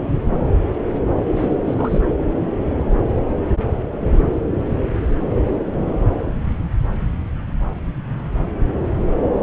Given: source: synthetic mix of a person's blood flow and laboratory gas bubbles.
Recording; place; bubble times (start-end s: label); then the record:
Doppler ultrasound of blood flow; subclavian vein
1.28-1.59 s: bubbles
1.67-2.00 s: bubbles
From the record:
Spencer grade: 1 (occasional bubble signal discernible with the cardiac motion signal, with majority of cardiac periods free of bubbles); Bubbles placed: anywhere in the cardiac cycle